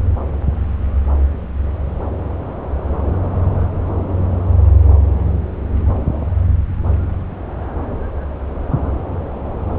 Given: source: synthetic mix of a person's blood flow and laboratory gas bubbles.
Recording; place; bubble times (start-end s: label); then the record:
Doppler ultrasound of blood flow; subclavian vein
3.06-3.15 s: bubbles
From the record:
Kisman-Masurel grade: 111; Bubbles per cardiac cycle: 1 to 2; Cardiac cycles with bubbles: 1 to 10%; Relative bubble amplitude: barely perceptible (0.100 to 0.250); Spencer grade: 1 (occasional bubble signal discernible with the cardiac motion signal, with majority of cardiac periods free of bubbles); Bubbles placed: anywhere in the cardiac cycle